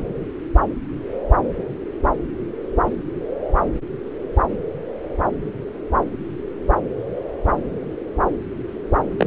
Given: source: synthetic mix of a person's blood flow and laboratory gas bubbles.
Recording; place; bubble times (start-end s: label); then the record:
Doppler ultrasound of blood flow; subclavian vein
9.18-9.27 s: bubbles
From the record:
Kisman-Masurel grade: 113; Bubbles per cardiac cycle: 1 to 2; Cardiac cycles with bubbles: 1 to 10%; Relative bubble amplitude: loud (0.450 to 0.775); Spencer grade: 1 (occasional bubble signal discernible with the cardiac motion signal, with majority of cardiac periods free of bubbles); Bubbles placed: anywhere in the cardiac cycle